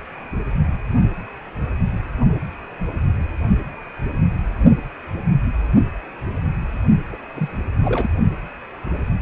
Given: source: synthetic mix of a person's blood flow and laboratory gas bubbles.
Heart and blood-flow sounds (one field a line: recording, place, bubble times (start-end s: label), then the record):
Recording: Doppler ultrasound of blood flow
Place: precordium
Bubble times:
7.11-7.17 s: bubbles
7.35-7.49 s: bubbles
7.80-8.09 s: bubbles
From the record:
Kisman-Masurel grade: 221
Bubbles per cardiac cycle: several, 3 to 8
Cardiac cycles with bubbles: 10 to 50%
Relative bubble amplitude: barely perceptible (0.100 to 0.250)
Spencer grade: 2 (many but less than half of the cardiac periods contain bubble signals, singularly or in groups)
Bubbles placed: only in the low amplitude regions of the cardiac cycle